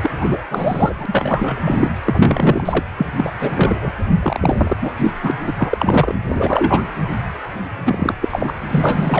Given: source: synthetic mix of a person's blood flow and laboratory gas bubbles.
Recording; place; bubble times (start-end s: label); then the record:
Doppler ultrasound of blood flow; precordium
0.03-0.42 s: bubbles
0.50-0.95 s: bubbles
0.98-1.90 s: bubbles
2.06-2.85 s: bubbles
2.98-3.06 s: bubbles
3.16-3.33 s: bubbles
3.39-3.77 s: bubbles
3.82-3.92 s: bubbles
4.22-4.76 s: bubbles
4.81-4.92 s: bubbles
4.99-5.11 s: bubbles
5.22-5.32 s: bubbles
5.46-5.53 s: bubbles
5.58-6.15 s: bubbles
6.29-6.83 s: bubbles
7.86-8.14 s: bubbles
8.21-8.54 s: bubbles
8.68-9.20 s: bubbles
From the record:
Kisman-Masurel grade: 333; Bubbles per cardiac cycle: rolling drumbeat, 9 or more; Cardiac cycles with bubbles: 50 to 99%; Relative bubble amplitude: loud (0.450 to 0.775); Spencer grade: 3 (all of the cardiac periods contain showers or single bubble signals, but not dominating or overriding the cardiac motion signals); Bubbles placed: anywhere in the cardiac cycle